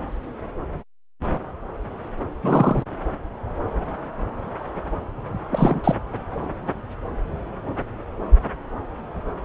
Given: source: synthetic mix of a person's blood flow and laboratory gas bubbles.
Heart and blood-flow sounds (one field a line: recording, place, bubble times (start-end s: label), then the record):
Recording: Doppler ultrasound of blood flow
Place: subclavian vein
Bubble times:
2.43-2.83 s: bubbles
5.50-5.95 s: bubbles
From the record:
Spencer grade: 1 (occasional bubble signal discernible with the cardiac motion signal, with majority of cardiac periods free of bubbles)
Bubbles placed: anywhere in the cardiac cycle